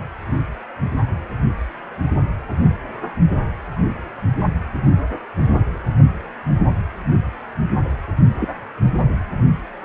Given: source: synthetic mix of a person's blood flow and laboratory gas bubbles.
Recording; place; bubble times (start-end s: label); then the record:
Doppler ultrasound of blood flow; precordium
8.39-8.48 s: bubbles
From the record:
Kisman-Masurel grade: 122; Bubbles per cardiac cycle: 1 to 2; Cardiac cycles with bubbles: 10 to 50%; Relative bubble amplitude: moderate (0.250 to 0.450); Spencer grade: 2 (many but less than half of the cardiac periods contain bubble signals, singularly or in groups); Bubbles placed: anywhere in the cardiac cycle